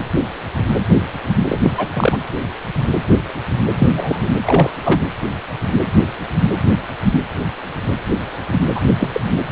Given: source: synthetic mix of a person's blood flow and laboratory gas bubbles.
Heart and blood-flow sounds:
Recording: Doppler ultrasound of blood flow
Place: precordium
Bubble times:
1.48-1.70 s: bubbles
1.76-1.89 s: bubbles
1.93-2.18 s: bubbles
3.76-4.29 s: bubbles
4.46-4.71 s: bubbles
4.83-5.02 s: bubbles
8.75-8.79 s: bubbles
9.00-9.10 s: bubbles
9.13-9.21 s: bubbles
From the record:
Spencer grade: 2 (many but less than half of the cardiac periods contain bubble signals, singularly or in groups)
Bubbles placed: anywhere in the cardiac cycle

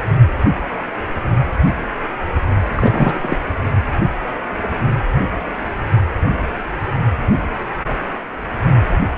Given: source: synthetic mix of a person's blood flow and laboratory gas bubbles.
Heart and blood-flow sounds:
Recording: Doppler ultrasound of blood flow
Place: precordium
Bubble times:
2.75-3.19 s: bubbles
3.21-3.37 s: bubbles
From the record:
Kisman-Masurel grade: 212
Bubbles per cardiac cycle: several, 3 to 8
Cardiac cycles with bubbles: 1 to 10%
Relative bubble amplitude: moderate (0.250 to 0.450)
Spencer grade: 1 (occasional bubble signal discernible with the cardiac motion signal, with majority of cardiac periods free of bubbles)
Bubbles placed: only in the low amplitude regions of the cardiac cycle

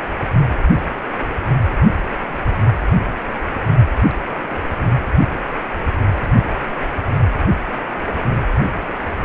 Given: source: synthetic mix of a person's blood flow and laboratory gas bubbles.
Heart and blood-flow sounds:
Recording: Doppler ultrasound of blood flow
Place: precordium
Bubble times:
4.10-4.14 s: bubbles
4.38-4.62 s: bubbles
4.81-4.85 s: bubbles
From the record:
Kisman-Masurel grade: 211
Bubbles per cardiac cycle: several, 3 to 8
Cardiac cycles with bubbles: 1 to 10%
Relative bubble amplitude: barely perceptible (0.100 to 0.250)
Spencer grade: 1 (occasional bubble signal discernible with the cardiac motion signal, with majority of cardiac periods free of bubbles)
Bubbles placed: anywhere in the cardiac cycle

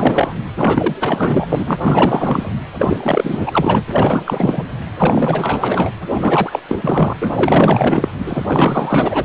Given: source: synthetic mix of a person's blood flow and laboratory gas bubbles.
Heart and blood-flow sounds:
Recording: Doppler ultrasound of blood flow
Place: precordium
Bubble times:
0.00-0.33 s: bubbles
0.57-0.96 s: bubbles
1.00-1.78 s: bubbles
1.82-2.50 s: bubbles
2.79-3.84 s: bubbles
3.88-4.63 s: bubbles
4.98-5.90 s: bubbles
6.12-6.60 s: bubbles
6.68-6.77 s: bubbles
6.81-7.13 s: bubbles
7.21-7.31 s: bubbles
7.36-8.09 s: bubbles
8.19-9.25 s: bubbles
From the record:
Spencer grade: 4 (maximum detectable bubble signal sounding continuously throughout systole and diastole of every cardiac period, and overriding the amplitude of the normal cardiac signals)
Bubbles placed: anywhere in the cardiac cycle

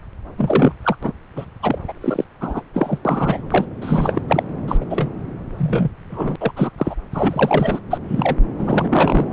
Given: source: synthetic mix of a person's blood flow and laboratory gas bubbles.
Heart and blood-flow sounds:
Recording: Doppler ultrasound of blood flow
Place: subclavian vein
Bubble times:
0.37-0.74 s: bubbles
0.83-0.96 s: bubbles
1.03-1.12 s: bubbles
1.36-1.45 s: bubbles
1.62-1.79 s: bubbles
1.88-1.93 s: bubbles
2.00-2.25 s: bubbles
2.41-2.62 s: bubbles
2.73-2.99 s: bubbles
3.05-3.65 s: bubbles
3.81-4.21 s: bubbles
4.28-4.43 s: bubbles
4.67-4.77 s: bubbles
4.80-4.85 s: bubbles
4.89-5.08 s: bubbles
5.57-5.90 s: bubbles
6.10-6.36 s: bubbles
6.40-6.51 s: bubbles
6.56-6.71 s: bubbles
6.77-6.95 s: bubbles
7.12-7.79 s: bubbles
7.90-7.98 s: bubbles
8.08-8.36 s: bubbles
8.58-9.26 s: bubbles
9.31-9.33 s: bubbles
From the record:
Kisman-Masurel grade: 243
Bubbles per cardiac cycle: several, 3 to 8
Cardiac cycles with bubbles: 100%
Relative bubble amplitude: loud (0.450 to 0.775)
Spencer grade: 3 (all of the cardiac periods contain showers or single bubble signals, but not dominating or overriding the cardiac motion signals)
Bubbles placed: anywhere in the cardiac cycle

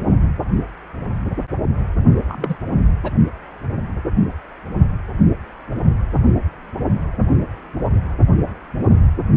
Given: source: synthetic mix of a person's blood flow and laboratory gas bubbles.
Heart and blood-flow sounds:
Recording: Doppler ultrasound of blood flow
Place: precordium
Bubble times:
2.29-2.57 s: bubbles
3.03-3.12 s: bubbles
From the record:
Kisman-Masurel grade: 212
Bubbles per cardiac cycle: several, 3 to 8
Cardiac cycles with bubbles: 1 to 10%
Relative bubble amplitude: moderate (0.250 to 0.450)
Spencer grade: 1 (occasional bubble signal discernible with the cardiac motion signal, with majority of cardiac periods free of bubbles)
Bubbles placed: only in the low amplitude regions of the cardiac cycle

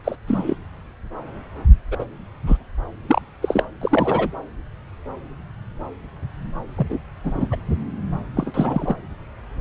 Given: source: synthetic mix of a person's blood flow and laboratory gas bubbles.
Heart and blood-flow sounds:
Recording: Doppler ultrasound of blood flow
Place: subclavian vein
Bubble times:
0.04-0.16 s: bubbles
0.27-0.55 s: bubbles
1.91-2.05 s: bubbles
2.46-2.57 s: bubbles
3.08-3.21 s: bubbles
3.42-3.65 s: bubbles
3.81-4.28 s: bubbles
6.78-6.87 s: bubbles
6.89-7.00 s: bubbles
7.24-7.57 s: bubbles
8.37-8.96 s: bubbles
From the record:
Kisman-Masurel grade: 232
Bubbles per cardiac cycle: several, 3 to 8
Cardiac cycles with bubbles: 50 to 99%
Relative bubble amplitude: moderate (0.250 to 0.450)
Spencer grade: 3 (all of the cardiac periods contain showers or single bubble signals, but not dominating or overriding the cardiac motion signals)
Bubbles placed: anywhere in the cardiac cycle

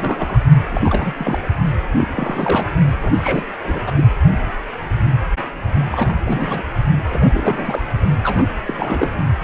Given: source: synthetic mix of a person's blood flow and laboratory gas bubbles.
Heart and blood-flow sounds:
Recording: Doppler ultrasound of blood flow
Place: precordium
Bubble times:
0.00-0.41 s: bubbles
0.69-1.14 s: bubbles
1.17-1.40 s: bubbles
1.97-2.08 s: bubbles
2.10-2.70 s: bubbles
2.96-3.44 s: bubbles
3.60-3.93 s: bubbles
3.96-4.04 s: bubbles
5.90-6.14 s: bubbles
6.25-6.63 s: bubbles
7.08-8.00 s: bubbles
8.24-8.53 s: bubbles
8.66-9.10 s: bubbles
From the record:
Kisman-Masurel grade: 332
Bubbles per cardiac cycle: rolling drumbeat, 9 or more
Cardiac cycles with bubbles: 50 to 99%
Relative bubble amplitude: moderate (0.250 to 0.450)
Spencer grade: 3 (all of the cardiac periods contain showers or single bubble signals, but not dominating or overriding the cardiac motion signals)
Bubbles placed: only in the low amplitude regions of the cardiac cycle

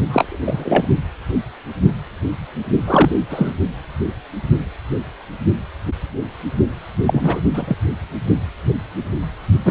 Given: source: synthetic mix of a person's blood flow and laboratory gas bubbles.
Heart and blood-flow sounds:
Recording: Doppler ultrasound of blood flow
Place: precordium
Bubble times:
0.08-0.39 s: bubbles
0.45-0.86 s: bubbles
2.86-3.16 s: bubbles
3.29-3.54 s: bubbles
7.05-7.40 s: bubbles
7.54-7.75 s: bubbles
9.65-9.71 s: bubbles
From the record:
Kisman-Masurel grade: 223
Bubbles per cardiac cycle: several, 3 to 8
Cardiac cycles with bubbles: 10 to 50%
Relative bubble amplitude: loud (0.450 to 0.775)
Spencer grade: 2 (many but less than half of the cardiac periods contain bubble signals, singularly or in groups)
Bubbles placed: only in the low amplitude regions of the cardiac cycle

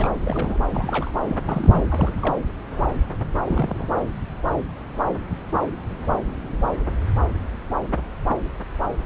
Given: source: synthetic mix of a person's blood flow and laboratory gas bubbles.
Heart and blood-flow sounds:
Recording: Doppler ultrasound of blood flow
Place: subclavian vein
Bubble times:
0.00-0.09 s: bubbles
0.25-0.58 s: bubbles
0.71-1.10 s: bubbles
1.27-1.38 s: bubbles
1.45-1.84 s: bubbles
1.90-2.14 s: bubbles
2.22-2.35 s: bubbles
3.46-3.89 s: bubbles
From the record:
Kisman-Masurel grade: 221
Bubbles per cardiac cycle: several, 3 to 8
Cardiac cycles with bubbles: 10 to 50%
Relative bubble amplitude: barely perceptible (0.100 to 0.250)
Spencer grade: 2 (many but less than half of the cardiac periods contain bubble signals, singularly or in groups)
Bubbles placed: anywhere in the cardiac cycle

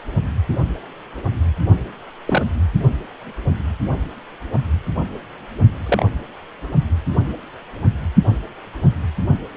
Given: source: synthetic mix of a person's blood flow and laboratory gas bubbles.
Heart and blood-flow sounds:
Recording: Doppler ultrasound of blood flow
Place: precordium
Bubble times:
2.27-2.43 s: bubbles
5.86-6.06 s: bubbles
From the record:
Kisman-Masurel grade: 122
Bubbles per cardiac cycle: 1 to 2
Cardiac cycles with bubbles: 10 to 50%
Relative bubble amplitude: moderate (0.250 to 0.450)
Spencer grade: 2 (many but less than half of the cardiac periods contain bubble signals, singularly or in groups)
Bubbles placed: only in the low amplitude regions of the cardiac cycle

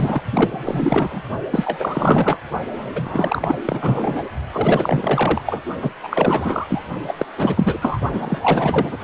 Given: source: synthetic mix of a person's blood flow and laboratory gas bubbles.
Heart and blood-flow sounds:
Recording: Doppler ultrasound of blood flow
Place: precordium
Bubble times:
0.00-0.22 s: bubbles
0.33-1.22 s: bubbles
1.51-2.38 s: bubbles
2.71-3.55 s: bubbles
3.65-4.29 s: bubbles
4.52-5.42 s: bubbles
5.46-5.61 s: bubbles
5.82-5.91 s: bubbles
6.03-6.86 s: bubbles
7.07-7.15 s: bubbles
7.18-7.25 s: bubbles
7.37-7.78 s: bubbles
7.80-8.00 s: bubbles
8.09-8.38 s: bubbles
8.41-8.96 s: bubbles
From the record:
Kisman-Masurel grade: 444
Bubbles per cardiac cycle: continuous sound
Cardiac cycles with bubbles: 100%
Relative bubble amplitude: maximal (0.775 to 0.999)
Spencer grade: 4 (maximum detectable bubble signal sounding continuously throughout systole and diastole of every cardiac period, and overriding the amplitude of the normal cardiac signals)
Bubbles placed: only in the low amplitude regions of the cardiac cycle

